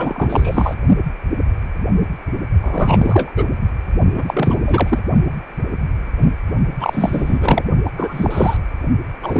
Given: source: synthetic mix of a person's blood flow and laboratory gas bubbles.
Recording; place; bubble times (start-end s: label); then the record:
Doppler ultrasound of blood flow; precordium
0.00-0.76 s: bubbles
2.63-3.32 s: bubbles
3.36-3.45 s: bubbles
4.17-4.59 s: bubbles
4.65-4.99 s: bubbles
6.80-7.64 s: bubbles
7.85-7.90 s: bubbles
7.97-8.57 s: bubbles
9.21-9.40 s: bubbles
From the record:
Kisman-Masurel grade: 333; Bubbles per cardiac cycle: rolling drumbeat, 9 or more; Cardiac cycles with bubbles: 50 to 99%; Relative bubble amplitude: loud (0.450 to 0.775); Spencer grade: 3 (all of the cardiac periods contain showers or single bubble signals, but not dominating or overriding the cardiac motion signals); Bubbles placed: only in the low amplitude regions of the cardiac cycle